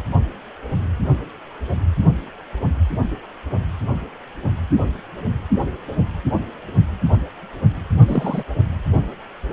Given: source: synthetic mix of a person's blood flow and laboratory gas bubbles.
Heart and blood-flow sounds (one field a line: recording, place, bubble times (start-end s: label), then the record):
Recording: Doppler ultrasound of blood flow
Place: precordium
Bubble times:
8.07-8.44 s: bubbles
From the record:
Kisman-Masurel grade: 112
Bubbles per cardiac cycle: 1 to 2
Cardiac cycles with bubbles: 1 to 10%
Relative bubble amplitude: moderate (0.250 to 0.450)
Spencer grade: 1 (occasional bubble signal discernible with the cardiac motion signal, with majority of cardiac periods free of bubbles)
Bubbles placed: only in the low amplitude regions of the cardiac cycle